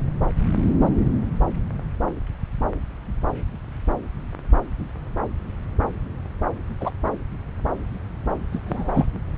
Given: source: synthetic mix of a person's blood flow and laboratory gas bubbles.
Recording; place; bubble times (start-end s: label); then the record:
Doppler ultrasound of blood flow; subclavian vein
6.80-6.91 s: bubbles
8.52-9.05 s: bubbles
From the record:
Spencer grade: 2 (many but less than half of the cardiac periods contain bubble signals, singularly or in groups); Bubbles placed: anywhere in the cardiac cycle